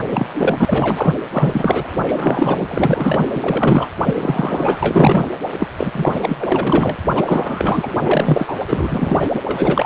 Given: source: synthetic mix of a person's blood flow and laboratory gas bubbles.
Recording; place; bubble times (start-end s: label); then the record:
Doppler ultrasound of blood flow; precordium
0.11-0.27 s: bubbles
0.33-1.15 s: bubbles
1.32-1.88 s: bubbles
2.07-3.29 s: bubbles
3.34-3.88 s: bubbles
4.05-4.78 s: bubbles
4.82-5.29 s: bubbles
5.58-5.67 s: bubbles
5.78-6.36 s: bubbles
6.38-6.96 s: bubbles
7.15-7.96 s: bubbles
8.01-8.54 s: bubbles
8.68-9.29 s: bubbles
9.33-9.42 s: bubbles
9.45-9.86 s: bubbles
From the record:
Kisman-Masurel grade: 343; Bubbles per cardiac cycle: rolling drumbeat, 9 or more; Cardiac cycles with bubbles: 100%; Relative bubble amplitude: loud (0.450 to 0.775); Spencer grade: 3 (all of the cardiac periods contain showers or single bubble signals, but not dominating or overriding the cardiac motion signals); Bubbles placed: anywhere in the cardiac cycle